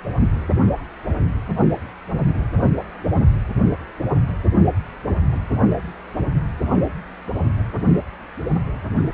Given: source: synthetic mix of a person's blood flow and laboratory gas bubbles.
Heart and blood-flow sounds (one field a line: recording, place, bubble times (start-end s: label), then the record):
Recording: Doppler ultrasound of blood flow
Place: precordium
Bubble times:
no bubbles
From the record:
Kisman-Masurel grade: 000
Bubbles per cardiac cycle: 0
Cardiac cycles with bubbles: 0%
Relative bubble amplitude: no bubbles discernible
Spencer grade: 0 (complete lack of bubble signals)